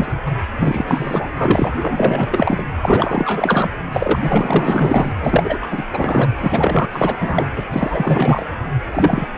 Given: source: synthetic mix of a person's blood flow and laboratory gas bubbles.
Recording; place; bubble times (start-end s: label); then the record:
Doppler ultrasound of blood flow; precordium
0.00-0.14 s: bubbles
0.26-0.32 s: bubbles
0.57-0.84 s: bubbles
0.87-1.74 s: bubbles
1.80-2.62 s: bubbles
2.82-3.70 s: bubbles
3.92-4.20 s: bubbles
4.22-5.12 s: bubbles
5.20-5.58 s: bubbles
5.62-5.67 s: bubbles
5.71-5.84 s: bubbles
5.92-6.30 s: bubbles
6.40-6.89 s: bubbles
6.92-7.17 s: bubbles
7.20-7.47 s: bubbles
7.56-7.65 s: bubbles
7.72-8.44 s: bubbles
8.91-9.28 s: bubbles
From the record:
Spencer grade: 4 (maximum detectable bubble signal sounding continuously throughout systole and diastole of every cardiac period, and overriding the amplitude of the normal cardiac signals); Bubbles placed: anywhere in the cardiac cycle